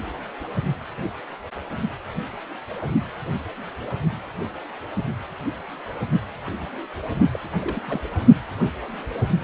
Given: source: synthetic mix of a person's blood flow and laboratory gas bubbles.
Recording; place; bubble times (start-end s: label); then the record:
Doppler ultrasound of blood flow; precordium
7.33-7.40 s: bubbles
7.61-8.00 s: bubbles
From the record:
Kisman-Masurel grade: 221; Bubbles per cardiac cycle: several, 3 to 8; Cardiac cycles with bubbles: 10 to 50%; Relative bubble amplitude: barely perceptible (0.100 to 0.250); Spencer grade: 2 (many but less than half of the cardiac periods contain bubble signals, singularly or in groups); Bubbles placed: only in the low amplitude regions of the cardiac cycle